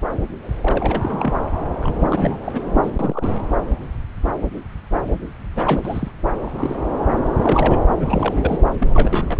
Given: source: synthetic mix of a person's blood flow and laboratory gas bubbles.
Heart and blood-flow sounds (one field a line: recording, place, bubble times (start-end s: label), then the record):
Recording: Doppler ultrasound of blood flow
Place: subclavian vein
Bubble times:
0.62-1.34 s: bubbles
1.82-2.60 s: bubbles
2.82-2.91 s: bubbles
2.99-3.40 s: bubbles
5.56-6.11 s: bubbles
6.40-6.77 s: bubbles
7.39-7.83 s: bubbles
8.00-8.66 s: bubbles
8.79-9.39 s: bubbles
From the record:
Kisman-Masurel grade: 332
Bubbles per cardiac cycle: rolling drumbeat, 9 or more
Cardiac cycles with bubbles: 50 to 99%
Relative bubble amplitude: moderate (0.250 to 0.450)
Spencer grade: 3 (all of the cardiac periods contain showers or single bubble signals, but not dominating or overriding the cardiac motion signals)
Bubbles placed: anywhere in the cardiac cycle